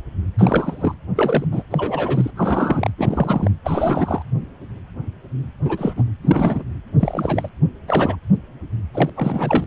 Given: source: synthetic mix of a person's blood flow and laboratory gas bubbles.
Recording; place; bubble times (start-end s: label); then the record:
Doppler ultrasound of blood flow; precordium
0.38-0.94 s: bubbles
1.16-1.44 s: bubbles
1.51-1.63 s: bubbles
1.70-2.30 s: bubbles
2.36-2.90 s: bubbles
2.98-3.50 s: bubbles
3.64-4.23 s: bubbles
5.65-5.94 s: bubbles
5.96-6.04 s: bubbles
6.23-6.63 s: bubbles
6.99-7.50 s: bubbles
7.88-8.16 s: bubbles
8.94-9.10 s: bubbles
9.16-9.64 s: bubbles
From the record:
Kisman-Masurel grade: 232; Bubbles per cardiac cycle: several, 3 to 8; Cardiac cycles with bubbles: 50 to 99%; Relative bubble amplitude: moderate (0.250 to 0.450); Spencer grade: 3 (all of the cardiac periods contain showers or single bubble signals, but not dominating or overriding the cardiac motion signals); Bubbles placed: anywhere in the cardiac cycle